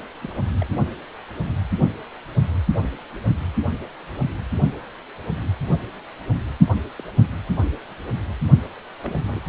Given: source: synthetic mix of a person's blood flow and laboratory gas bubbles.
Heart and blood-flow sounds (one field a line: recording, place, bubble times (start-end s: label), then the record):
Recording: Doppler ultrasound of blood flow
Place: precordium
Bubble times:
0.21-0.33 s: bubbles
0.60-0.66 s: bubbles
6.96-7.03 s: bubbles
9.03-9.40 s: bubbles
From the record:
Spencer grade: 2 (many but less than half of the cardiac periods contain bubble signals, singularly or in groups)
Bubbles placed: only in the low amplitude regions of the cardiac cycle